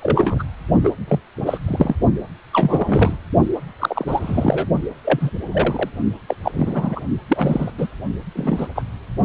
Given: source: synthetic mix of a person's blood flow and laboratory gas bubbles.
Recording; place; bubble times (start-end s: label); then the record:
Doppler ultrasound of blood flow; precordium
0.00-0.43 s: bubbles
0.83-0.92 s: bubbles
1.08-1.20 s: bubbles
1.46-1.58 s: bubbles
1.67-1.96 s: bubbles
2.53-3.17 s: bubbles
3.79-4.69 s: bubbles
5.04-5.30 s: bubbles
5.51-5.89 s: bubbles
6.27-6.37 s: bubbles
6.43-7.00 s: bubbles
7.28-7.72 s: bubbles
7.78-7.89 s: bubbles
8.36-8.68 s: bubbles
8.76-8.83 s: bubbles
From the record:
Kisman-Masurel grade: 242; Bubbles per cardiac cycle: several, 3 to 8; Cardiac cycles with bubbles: 100%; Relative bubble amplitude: moderate (0.250 to 0.450); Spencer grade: 3 (all of the cardiac periods contain showers or single bubble signals, but not dominating or overriding the cardiac motion signals); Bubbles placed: only in the low amplitude regions of the cardiac cycle